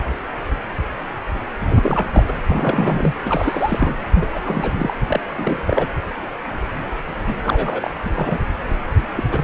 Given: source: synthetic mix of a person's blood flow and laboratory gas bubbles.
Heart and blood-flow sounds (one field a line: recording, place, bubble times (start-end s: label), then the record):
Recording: Doppler ultrasound of blood flow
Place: precordium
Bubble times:
1.70-2.07 s: bubbles
2.13-2.23 s: bubbles
2.27-2.33 s: bubbles
2.46-3.14 s: bubbles
3.24-3.94 s: bubbles
4.15-4.28 s: bubbles
4.32-4.94 s: bubbles
5.08-5.20 s: bubbles
5.37-5.88 s: bubbles
7.27-7.40 s: bubbles
7.43-7.90 s: bubbles
8.04-8.10 s: bubbles
8.16-8.39 s: bubbles
9.17-9.23 s: bubbles
9.31-9.44 s: bubbles
From the record:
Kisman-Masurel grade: 332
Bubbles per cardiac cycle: rolling drumbeat, 9 or more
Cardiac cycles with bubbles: 50 to 99%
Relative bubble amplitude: moderate (0.250 to 0.450)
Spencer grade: 3 (all of the cardiac periods contain showers or single bubble signals, but not dominating or overriding the cardiac motion signals)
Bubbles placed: anywhere in the cardiac cycle